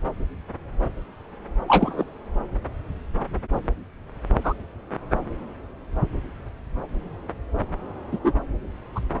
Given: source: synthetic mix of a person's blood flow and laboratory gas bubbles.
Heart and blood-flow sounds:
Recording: Doppler ultrasound of blood flow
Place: subclavian vein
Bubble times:
1.68-2.05 s: bubbles
4.43-4.54 s: bubbles
8.12-8.19 s: bubbles
8.24-8.33 s: bubbles
8.95-9.00 s: bubbles
From the record:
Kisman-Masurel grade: 123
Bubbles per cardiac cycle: 1 to 2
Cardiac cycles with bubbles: 10 to 50%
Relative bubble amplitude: loud (0.450 to 0.775)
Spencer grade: 2 (many but less than half of the cardiac periods contain bubble signals, singularly or in groups)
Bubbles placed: anywhere in the cardiac cycle

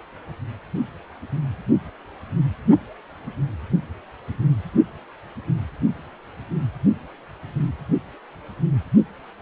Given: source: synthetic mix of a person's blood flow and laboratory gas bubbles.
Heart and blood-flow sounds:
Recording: Doppler ultrasound of blood flow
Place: precordium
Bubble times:
no bubbles
From the record:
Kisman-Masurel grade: 000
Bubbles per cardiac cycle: 0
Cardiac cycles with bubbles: 0%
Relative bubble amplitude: no bubbles discernible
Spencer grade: 0 (complete lack of bubble signals)

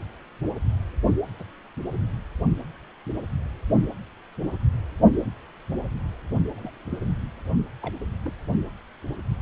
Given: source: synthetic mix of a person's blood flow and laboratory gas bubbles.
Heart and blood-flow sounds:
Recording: Doppler ultrasound of blood flow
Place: precordium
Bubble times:
1.39-1.44 s: bubbles
6.56-6.71 s: bubbles
6.90-6.99 s: bubbles
7.81-7.95 s: bubbles
8.23-8.33 s: bubbles
From the record:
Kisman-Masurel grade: 121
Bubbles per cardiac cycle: 1 to 2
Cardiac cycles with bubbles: 10 to 50%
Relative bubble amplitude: barely perceptible (0.100 to 0.250)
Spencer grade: 2 (many but less than half of the cardiac periods contain bubble signals, singularly or in groups)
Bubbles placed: only in the low amplitude regions of the cardiac cycle

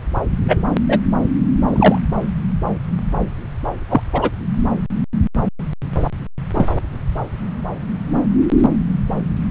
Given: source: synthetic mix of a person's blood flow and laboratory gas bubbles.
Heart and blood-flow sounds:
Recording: Doppler ultrasound of blood flow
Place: subclavian vein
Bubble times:
0.48-0.66 s: bubbles
0.89-0.99 s: bubbles
1.67-2.02 s: bubbles
3.89-4.01 s: bubbles
4.12-4.30 s: bubbles
6.54-6.68 s: bubbles
From the record:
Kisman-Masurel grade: 123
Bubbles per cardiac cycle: 1 to 2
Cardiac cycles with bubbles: 10 to 50%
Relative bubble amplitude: loud (0.450 to 0.775)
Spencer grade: 2 (many but less than half of the cardiac periods contain bubble signals, singularly or in groups)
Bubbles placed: anywhere in the cardiac cycle

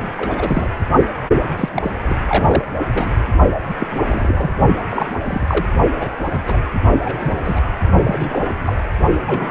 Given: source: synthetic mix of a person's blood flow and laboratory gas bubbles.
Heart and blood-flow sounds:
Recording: Doppler ultrasound of blood flow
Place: precordium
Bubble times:
0.00-0.10 s: bubbles
0.17-0.71 s: bubbles
1.56-1.69 s: bubbles
1.72-1.91 s: bubbles
2.01-2.73 s: bubbles
2.94-3.10 s: bubbles
3.69-3.75 s: bubbles
3.79-3.88 s: bubbles
3.91-4.50 s: bubbles
4.89-5.12 s: bubbles
5.23-5.66 s: bubbles
6.00-6.09 s: bubbles
6.31-6.41 s: bubbles
6.47-6.64 s: bubbles
7.04-7.35 s: bubbles
7.43-7.61 s: bubbles
8.04-8.56 s: bubbles
8.66-8.76 s: bubbles
9.26-9.51 s: bubbles
From the record:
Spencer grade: 3 (all of the cardiac periods contain showers or single bubble signals, but not dominating or overriding the cardiac motion signals)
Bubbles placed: only in the low amplitude regions of the cardiac cycle

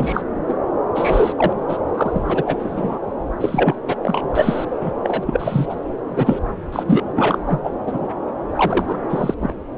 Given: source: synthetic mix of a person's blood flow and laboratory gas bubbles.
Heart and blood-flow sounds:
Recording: Doppler ultrasound of blood flow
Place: subclavian vein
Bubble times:
0.00-0.22 s: bubbles
0.48-0.55 s: bubbles
0.95-1.33 s: bubbles
1.36-1.53 s: bubbles
1.68-1.77 s: bubbles
1.94-2.44 s: bubbles
2.46-2.99 s: bubbles
3.41-3.76 s: bubbles
3.88-3.96 s: bubbles
4.02-4.65 s: bubbles
4.80-4.91 s: bubbles
5.03-5.67 s: bubbles
5.69-5.75 s: bubbles
6.08-6.39 s: bubbles
6.72-6.83 s: bubbles
6.86-7.04 s: bubbles
7.15-7.38 s: bubbles
7.46-7.61 s: bubbles
7.63-7.71 s: bubbles
7.86-8.07 s: bubbles
8.55-8.97 s: bubbles
9.09-9.34 s: bubbles
9.40-9.54 s: bubbles
From the record:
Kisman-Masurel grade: 243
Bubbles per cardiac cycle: several, 3 to 8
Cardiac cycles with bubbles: 100%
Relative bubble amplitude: loud (0.450 to 0.775)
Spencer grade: 3 (all of the cardiac periods contain showers or single bubble signals, but not dominating or overriding the cardiac motion signals)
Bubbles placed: anywhere in the cardiac cycle

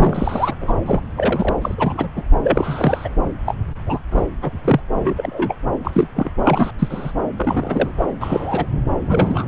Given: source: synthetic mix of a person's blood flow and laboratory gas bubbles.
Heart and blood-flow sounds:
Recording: Doppler ultrasound of blood flow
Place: subclavian vein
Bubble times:
0.00-0.55 s: bubbles
0.61-0.73 s: bubbles
0.86-1.00 s: bubbles
1.17-1.55 s: bubbles
1.62-2.08 s: bubbles
2.16-2.23 s: bubbles
2.42-3.09 s: bubbles
3.46-3.54 s: bubbles
3.87-4.00 s: bubbles
4.11-4.21 s: bubbles
4.41-4.58 s: bubbles
4.64-4.80 s: bubbles
4.93-5.14 s: bubbles
5.17-5.54 s: bubbles
5.84-6.08 s: bubbles
6.16-6.31 s: bubbles
6.44-6.71 s: bubbles
6.79-7.12 s: bubbles
7.37-7.92 s: bubbles
7.98-8.09 s: bubbles
8.21-8.66 s: bubbles
9.07-9.46 s: bubbles
From the record:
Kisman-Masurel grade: 242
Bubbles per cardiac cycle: several, 3 to 8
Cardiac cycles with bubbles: 100%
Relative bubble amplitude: moderate (0.250 to 0.450)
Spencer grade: 3 (all of the cardiac periods contain showers or single bubble signals, but not dominating or overriding the cardiac motion signals)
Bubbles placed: anywhere in the cardiac cycle

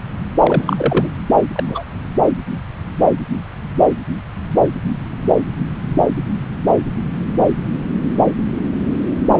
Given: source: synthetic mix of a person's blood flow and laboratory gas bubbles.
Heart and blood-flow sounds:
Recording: Doppler ultrasound of blood flow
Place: subclavian vein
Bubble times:
0.43-1.10 s: bubbles
1.55-1.64 s: bubbles
1.68-1.83 s: bubbles
From the record:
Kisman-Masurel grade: 222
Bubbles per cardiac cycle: several, 3 to 8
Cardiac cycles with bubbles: 10 to 50%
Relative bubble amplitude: moderate (0.250 to 0.450)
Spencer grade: 2 (many but less than half of the cardiac periods contain bubble signals, singularly or in groups)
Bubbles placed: anywhere in the cardiac cycle

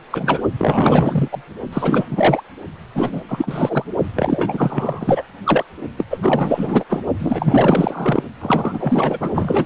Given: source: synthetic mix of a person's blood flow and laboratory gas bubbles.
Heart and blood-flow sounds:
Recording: Doppler ultrasound of blood flow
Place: precordium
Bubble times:
0.11-0.41 s: bubbles
0.57-1.28 s: bubbles
1.31-1.42 s: bubbles
1.73-2.05 s: bubbles
2.11-2.43 s: bubbles
2.94-3.21 s: bubbles
3.27-3.86 s: bubbles
4.15-5.23 s: bubbles
5.44-5.65 s: bubbles
5.97-6.05 s: bubbles
6.10-6.84 s: bubbles
6.88-7.02 s: bubbles
7.18-8.23 s: bubbles
8.41-9.66 s: bubbles
From the record:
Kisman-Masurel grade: 444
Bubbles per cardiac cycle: continuous sound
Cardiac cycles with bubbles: 100%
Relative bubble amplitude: maximal (0.775 to 0.999)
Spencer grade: 4 (maximum detectable bubble signal sounding continuously throughout systole and diastole of every cardiac period, and overriding the amplitude of the normal cardiac signals)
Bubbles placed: only in the low amplitude regions of the cardiac cycle

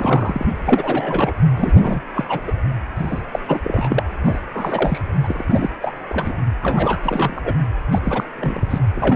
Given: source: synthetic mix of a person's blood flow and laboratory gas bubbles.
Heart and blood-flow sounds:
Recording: Doppler ultrasound of blood flow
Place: precordium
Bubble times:
0.00-0.46 s: bubbles
0.66-1.33 s: bubbles
1.56-2.02 s: bubbles
2.16-2.25 s: bubbles
2.28-2.40 s: bubbles
2.47-2.52 s: bubbles
2.95-3.22 s: bubbles
3.33-3.40 s: bubbles
3.48-3.60 s: bubbles
3.63-4.03 s: bubbles
4.24-4.39 s: bubbles
4.54-5.00 s: bubbles
5.23-5.44 s: bubbles
5.48-5.69 s: bubbles
5.81-5.92 s: bubbles
6.09-6.32 s: bubbles
6.62-6.97 s: bubbles
7.03-7.53 s: bubbles
7.92-7.99 s: bubbles
8.04-8.24 s: bubbles
8.38-8.67 s: bubbles
8.70-8.79 s: bubbles
8.95-9.16 s: bubbles
From the record:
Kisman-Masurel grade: 342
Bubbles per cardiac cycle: rolling drumbeat, 9 or more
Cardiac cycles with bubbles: 100%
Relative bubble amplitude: moderate (0.250 to 0.450)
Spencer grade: 3 (all of the cardiac periods contain showers or single bubble signals, but not dominating or overriding the cardiac motion signals)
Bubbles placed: anywhere in the cardiac cycle

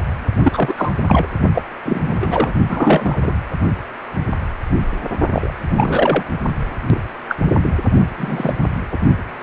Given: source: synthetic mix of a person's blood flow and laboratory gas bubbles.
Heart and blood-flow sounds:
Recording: Doppler ultrasound of blood flow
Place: precordium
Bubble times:
0.42-0.74 s: bubbles
0.77-0.92 s: bubbles
1.07-1.27 s: bubbles
1.54-1.62 s: bubbles
1.85-2.52 s: bubbles
2.68-3.35 s: bubbles
5.33-5.52 s: bubbles
5.69-6.23 s: bubbles
6.88-7.00 s: bubbles
7.29-7.37 s: bubbles
7.63-7.71 s: bubbles
8.17-8.54 s: bubbles
8.92-8.97 s: bubbles
From the record:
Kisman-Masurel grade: 233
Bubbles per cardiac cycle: several, 3 to 8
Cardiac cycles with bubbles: 50 to 99%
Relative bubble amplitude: loud (0.450 to 0.775)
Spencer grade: 3 (all of the cardiac periods contain showers or single bubble signals, but not dominating or overriding the cardiac motion signals)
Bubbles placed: only in the low amplitude regions of the cardiac cycle

